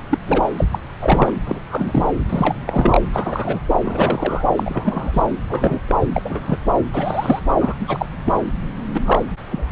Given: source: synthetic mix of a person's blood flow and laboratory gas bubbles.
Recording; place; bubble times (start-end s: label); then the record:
Doppler ultrasound of blood flow; subclavian vein
0.09-0.18 s: bubbles
0.26-0.48 s: bubbles
0.57-0.65 s: bubbles
0.71-0.78 s: bubbles
1.01-1.35 s: bubbles
1.46-1.59 s: bubbles
1.69-2.03 s: bubbles
2.29-2.55 s: bubbles
2.67-3.08 s: bubbles
3.13-3.59 s: bubbles
3.81-4.44 s: bubbles
4.55-5.22 s: bubbles
5.49-5.80 s: bubbles
5.88-5.95 s: bubbles
6.12-6.22 s: bubbles
6.25-6.58 s: bubbles
6.93-7.39 s: bubbles
7.59-7.74 s: bubbles
7.80-8.06 s: bubbles
8.25-8.33 s: bubbles
8.94-9.02 s: bubbles
9.04-9.21 s: bubbles
9.46-9.72 s: bubbles
From the record:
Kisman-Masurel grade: 243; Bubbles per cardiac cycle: several, 3 to 8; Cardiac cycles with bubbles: 100%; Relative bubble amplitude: loud (0.450 to 0.775); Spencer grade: 3 (all of the cardiac periods contain showers or single bubble signals, but not dominating or overriding the cardiac motion signals); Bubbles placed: anywhere in the cardiac cycle